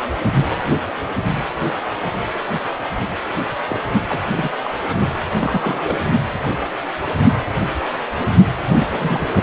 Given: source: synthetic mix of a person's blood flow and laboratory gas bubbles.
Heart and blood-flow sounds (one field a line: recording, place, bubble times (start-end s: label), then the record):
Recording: Doppler ultrasound of blood flow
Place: precordium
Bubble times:
3.68-3.82 s: bubbles
4.08-4.20 s: bubbles
4.35-4.52 s: bubbles
4.64-4.74 s: bubbles
4.89-4.96 s: bubbles
5.36-5.97 s: bubbles
8.72-8.87 s: bubbles
8.89-9.28 s: bubbles
From the record:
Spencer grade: 2 (many but less than half of the cardiac periods contain bubble signals, singularly or in groups)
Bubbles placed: anywhere in the cardiac cycle